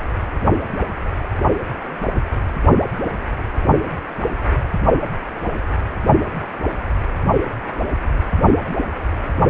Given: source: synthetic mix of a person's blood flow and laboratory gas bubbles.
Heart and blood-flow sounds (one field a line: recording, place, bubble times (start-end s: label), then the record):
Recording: Doppler ultrasound of blood flow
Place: precordium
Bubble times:
no bubbles
From the record:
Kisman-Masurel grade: 000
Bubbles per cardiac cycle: 0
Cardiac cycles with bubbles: 0%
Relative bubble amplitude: no bubbles discernible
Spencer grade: 0 (complete lack of bubble signals)